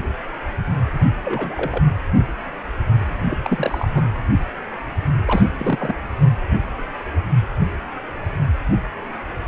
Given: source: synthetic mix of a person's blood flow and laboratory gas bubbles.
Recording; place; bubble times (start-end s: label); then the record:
Doppler ultrasound of blood flow; precordium
0.93-1.00 s: bubbles
1.25-1.83 s: bubbles
3.31-3.38 s: bubbles
3.43-3.88 s: bubbles
3.90-4.13 s: bubbles
5.26-5.42 s: bubbles
5.58-5.97 s: bubbles
From the record:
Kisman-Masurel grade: 222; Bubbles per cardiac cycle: several, 3 to 8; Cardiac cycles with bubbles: 10 to 50%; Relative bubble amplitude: moderate (0.250 to 0.450); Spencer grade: 2 (many but less than half of the cardiac periods contain bubble signals, singularly or in groups); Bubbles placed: anywhere in the cardiac cycle